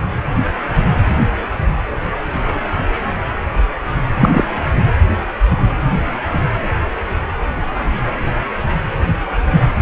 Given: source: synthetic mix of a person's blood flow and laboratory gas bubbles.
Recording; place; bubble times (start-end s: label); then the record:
Doppler ultrasound of blood flow; precordium
4.20-4.44 s: bubbles
From the record:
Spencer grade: 1 (occasional bubble signal discernible with the cardiac motion signal, with majority of cardiac periods free of bubbles); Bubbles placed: anywhere in the cardiac cycle